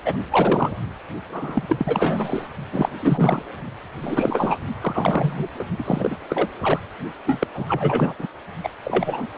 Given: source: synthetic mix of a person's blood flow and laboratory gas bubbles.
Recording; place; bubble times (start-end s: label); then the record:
Doppler ultrasound of blood flow; precordium
0.05-0.14 s: bubbles
0.30-0.72 s: bubbles
1.29-1.63 s: bubbles
1.69-2.47 s: bubbles
2.73-2.89 s: bubbles
3.00-3.43 s: bubbles
4.01-4.58 s: bubbles
4.80-5.48 s: bubbles
5.58-5.65 s: bubbles
5.78-6.17 s: bubbles
6.29-6.49 s: bubbles
6.61-6.79 s: bubbles
7.25-7.47 s: bubbles
7.54-8.14 s: bubbles
8.19-8.27 s: bubbles
8.63-8.69 s: bubbles
8.85-9.27 s: bubbles
From the record:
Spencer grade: 3 (all of the cardiac periods contain showers or single bubble signals, but not dominating or overriding the cardiac motion signals); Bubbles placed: only in the low amplitude regions of the cardiac cycle